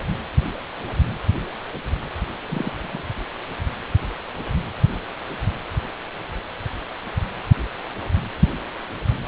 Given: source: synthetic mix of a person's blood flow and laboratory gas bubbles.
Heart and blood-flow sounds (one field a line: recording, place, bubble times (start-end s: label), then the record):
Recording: Doppler ultrasound of blood flow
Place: precordium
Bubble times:
2.46-2.73 s: bubbles
2.80-3.02 s: bubbles
From the record:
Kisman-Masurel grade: 111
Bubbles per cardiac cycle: 1 to 2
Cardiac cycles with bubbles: 1 to 10%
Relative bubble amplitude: barely perceptible (0.100 to 0.250)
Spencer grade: 1 (occasional bubble signal discernible with the cardiac motion signal, with majority of cardiac periods free of bubbles)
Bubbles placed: anywhere in the cardiac cycle